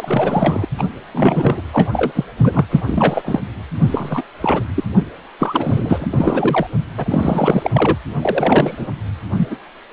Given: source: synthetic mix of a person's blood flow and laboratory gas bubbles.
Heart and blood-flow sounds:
Doppler ultrasound of blood flow; precordium
0.00-0.65 s: bubbles
0.78-0.84 s: bubbles
1.14-1.61 s: bubbles
1.73-1.89 s: bubbles
1.92-2.25 s: bubbles
2.40-2.66 s: bubbles
2.70-2.81 s: bubbles
2.86-3.22 s: bubbles
3.25-3.40 s: bubbles
3.78-4.24 s: bubbles
4.41-4.63 s: bubbles
4.75-4.84 s: bubbles
5.40-6.09 s: bubbles
6.12-6.67 s: bubbles
6.97-7.96 s: bubbles
8.21-8.88 s: bubbles
9.37-9.58 s: bubbles
From the record:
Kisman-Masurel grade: 333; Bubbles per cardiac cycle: rolling drumbeat, 9 or more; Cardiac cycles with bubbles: 50 to 99%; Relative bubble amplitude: loud (0.450 to 0.775); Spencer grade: 3 (all of the cardiac periods contain showers or single bubble signals, but not dominating or overriding the cardiac motion signals); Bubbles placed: anywhere in the cardiac cycle

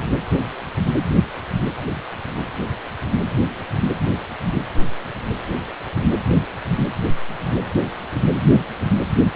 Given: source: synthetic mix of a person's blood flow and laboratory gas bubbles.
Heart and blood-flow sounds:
Doppler ultrasound of blood flow; precordium
no bubbles
From the record:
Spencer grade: 0 (complete lack of bubble signals)

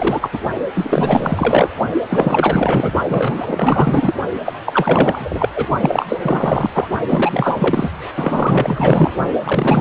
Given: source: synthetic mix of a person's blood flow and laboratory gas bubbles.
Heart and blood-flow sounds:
Doppler ultrasound of blood flow; precordium
0.00-0.29 s: bubbles
0.33-0.39 s: bubbles
0.73-1.69 s: bubbles
2.08-2.92 s: bubbles
3.08-4.14 s: bubbles
4.46-4.55 s: bubbles
4.66-5.50 s: bubbles
5.55-5.67 s: bubbles
5.80-6.17 s: bubbles
6.21-6.71 s: bubbles
6.74-6.88 s: bubbles
7.08-7.90 s: bubbles
8.15-9.12 s: bubbles
9.44-9.81 s: bubbles
From the record:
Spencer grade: 4 (maximum detectable bubble signal sounding continuously throughout systole and diastole of every cardiac period, and overriding the amplitude of the normal cardiac signals); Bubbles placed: only in the low amplitude regions of the cardiac cycle

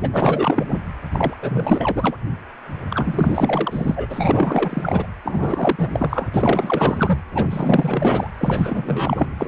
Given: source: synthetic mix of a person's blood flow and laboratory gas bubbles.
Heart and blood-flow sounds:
Doppler ultrasound of blood flow; precordium
0.01-0.66 s: bubbles
0.69-0.82 s: bubbles
1.12-1.36 s: bubbles
1.42-2.18 s: bubbles
2.90-4.06 s: bubbles
4.09-5.07 s: bubbles
5.23-6.30 s: bubbles
6.34-7.19 s: bubbles
7.32-8.28 s: bubbles
8.38-9.48 s: bubbles
From the record:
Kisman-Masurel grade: 444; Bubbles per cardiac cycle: continuous sound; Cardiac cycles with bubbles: 100%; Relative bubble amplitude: maximal (0.775 to 0.999); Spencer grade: 4 (maximum detectable bubble signal sounding continuously throughout systole and diastole of every cardiac period, and overriding the amplitude of the normal cardiac signals); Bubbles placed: anywhere in the cardiac cycle

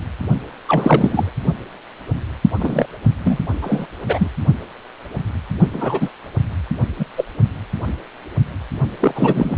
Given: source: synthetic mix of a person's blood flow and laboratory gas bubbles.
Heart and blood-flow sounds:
Doppler ultrasound of blood flow; precordium
0.67-1.31 s: bubbles
2.57-2.86 s: bubbles
3.23-3.40 s: bubbles
3.61-3.86 s: bubbles
4.07-4.28 s: bubbles
5.73-6.09 s: bubbles
6.98-7.05 s: bubbles
7.16-7.24 s: bubbles
8.99-9.57 s: bubbles
From the record:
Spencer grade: 3 (all of the cardiac periods contain showers or single bubble signals, but not dominating or overriding the cardiac motion signals); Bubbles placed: only in the low amplitude regions of the cardiac cycle

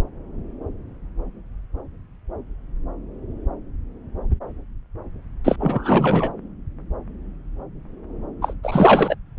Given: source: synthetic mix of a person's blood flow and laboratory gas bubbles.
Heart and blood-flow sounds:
Doppler ultrasound of blood flow; subclavian vein
5.44-5.56 s: bubbles
5.59-6.31 s: bubbles
8.41-8.54 s: bubbles
8.63-9.15 s: bubbles
From the record:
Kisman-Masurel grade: 213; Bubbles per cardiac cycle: several, 3 to 8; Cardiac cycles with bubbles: 1 to 10%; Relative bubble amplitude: loud (0.450 to 0.775); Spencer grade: 1 (occasional bubble signal discernible with the cardiac motion signal, with majority of cardiac periods free of bubbles); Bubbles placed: anywhere in the cardiac cycle

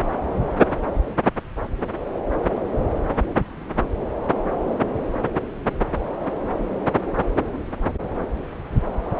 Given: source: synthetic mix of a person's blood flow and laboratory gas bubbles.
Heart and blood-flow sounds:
Doppler ultrasound of blood flow; subclavian vein
no bubbles
From the record:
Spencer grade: 0 (complete lack of bubble signals)

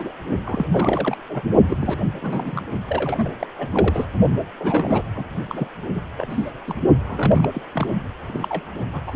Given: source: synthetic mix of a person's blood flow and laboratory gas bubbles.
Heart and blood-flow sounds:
Doppler ultrasound of blood flow; precordium
0.00-0.13 s: bubbles
0.45-1.17 s: bubbles
1.28-1.43 s: bubbles
1.68-1.76 s: bubbles
1.80-1.97 s: bubbles
2.21-2.62 s: bubbles
2.88-3.28 s: bubbles
3.40-3.46 s: bubbles
3.58-3.68 s: bubbles
3.72-4.05 s: bubbles
4.59-5.02 s: bubbles
5.15-5.25 s: bubbles
5.47-5.68 s: bubbles
5.93-6.01 s: bubbles
6.17-6.27 s: bubbles
6.29-6.51 s: bubbles
6.67-6.74 s: bubbles
7.07-7.51 s: bubbles
7.54-7.62 s: bubbles
7.72-7.87 s: bubbles
8.27-8.62 s: bubbles
8.93-9.16 s: bubbles
From the record:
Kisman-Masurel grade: 342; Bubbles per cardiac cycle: rolling drumbeat, 9 or more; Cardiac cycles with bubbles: 100%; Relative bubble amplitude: moderate (0.250 to 0.450); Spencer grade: 3 (all of the cardiac periods contain showers or single bubble signals, but not dominating or overriding the cardiac motion signals); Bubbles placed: only in the low amplitude regions of the cardiac cycle

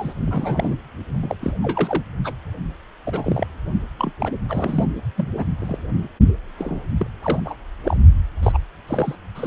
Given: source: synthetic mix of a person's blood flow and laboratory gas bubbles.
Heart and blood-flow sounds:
Doppler ultrasound of blood flow; precordium
0.00-0.12 s: bubbles
0.26-0.76 s: bubbles
1.22-1.36 s: bubbles
1.41-1.54 s: bubbles
1.62-2.03 s: bubbles
2.24-2.33 s: bubbles
3.03-3.47 s: bubbles
3.98-4.12 s: bubbles
4.21-4.33 s: bubbles
4.48-4.85 s: bubbles
5.17-5.27 s: bubbles
5.37-5.44 s: bubbles
5.60-5.77 s: bubbles
6.58-6.80 s: bubbles
6.98-7.07 s: bubbles
7.22-7.39 s: bubbles
7.45-7.56 s: bubbles
7.83-7.96 s: bubbles
8.43-8.58 s: bubbles
8.87-9.16 s: bubbles
9.35-9.47 s: bubbles
From the record:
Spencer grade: 3 (all of the cardiac periods contain showers or single bubble signals, but not dominating or overriding the cardiac motion signals); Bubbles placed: only in the low amplitude regions of the cardiac cycle

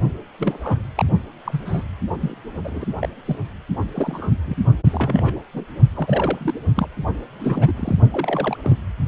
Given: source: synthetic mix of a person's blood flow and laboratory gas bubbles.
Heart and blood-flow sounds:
Doppler ultrasound of blood flow; precordium
0.38-0.82 s: bubbles
0.96-1.06 s: bubbles
1.46-1.82 s: bubbles
2.20-2.35 s: bubbles
2.64-2.85 s: bubbles
2.99-3.08 s: bubbles
3.25-3.36 s: bubbles
3.95-4.30 s: bubbles
4.45-4.57 s: bubbles
4.90-5.41 s: bubbles
5.53-5.62 s: bubbles
5.94-6.54 s: bubbles
6.75-6.87 s: bubbles
7.39-7.73 s: bubbles
7.76-7.97 s: bubbles
8.11-8.58 s: bubbles
8.63-8.77 s: bubbles
From the record:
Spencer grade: 3 (all of the cardiac periods contain showers or single bubble signals, but not dominating or overriding the cardiac motion signals); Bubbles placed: only in the low amplitude regions of the cardiac cycle

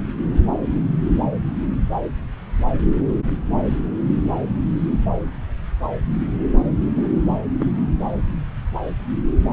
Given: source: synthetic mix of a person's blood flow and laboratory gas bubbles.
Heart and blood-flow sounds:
Doppler ultrasound of blood flow; subclavian vein
6.95-7.20 s: bubbles
7.60-7.66 s: bubbles
From the record:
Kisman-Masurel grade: 211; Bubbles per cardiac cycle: several, 3 to 8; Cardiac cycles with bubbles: 1 to 10%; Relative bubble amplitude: barely perceptible (0.100 to 0.250); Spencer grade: 1 (occasional bubble signal discernible with the cardiac motion signal, with majority of cardiac periods free of bubbles); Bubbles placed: anywhere in the cardiac cycle

